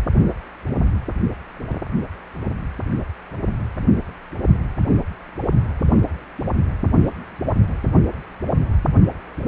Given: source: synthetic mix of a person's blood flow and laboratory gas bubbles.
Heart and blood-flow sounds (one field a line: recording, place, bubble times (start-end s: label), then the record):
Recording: Doppler ultrasound of blood flow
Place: precordium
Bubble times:
no bubbles
From the record:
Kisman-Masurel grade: 000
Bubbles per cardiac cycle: 0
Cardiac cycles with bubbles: 0%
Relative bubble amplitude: no bubbles discernible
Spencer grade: 0 (complete lack of bubble signals)